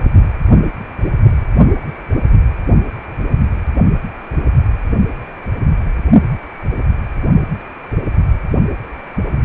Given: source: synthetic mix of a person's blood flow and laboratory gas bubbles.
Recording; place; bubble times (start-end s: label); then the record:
Doppler ultrasound of blood flow; precordium
1.85-1.89 s: bubbles
8.71-8.76 s: bubbles
From the record:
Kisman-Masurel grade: 121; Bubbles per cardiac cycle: 1 to 2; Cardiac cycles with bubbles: 10 to 50%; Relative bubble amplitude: barely perceptible (0.100 to 0.250); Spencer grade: 2 (many but less than half of the cardiac periods contain bubble signals, singularly or in groups); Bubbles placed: only in the low amplitude regions of the cardiac cycle